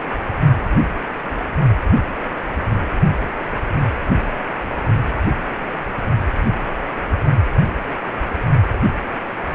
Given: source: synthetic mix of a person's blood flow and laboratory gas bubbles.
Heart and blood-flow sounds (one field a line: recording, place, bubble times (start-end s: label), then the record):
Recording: Doppler ultrasound of blood flow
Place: precordium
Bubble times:
no bubbles
From the record:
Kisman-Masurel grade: 000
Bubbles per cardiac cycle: 0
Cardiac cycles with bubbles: 0%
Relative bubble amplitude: no bubbles discernible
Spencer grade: 0 (complete lack of bubble signals)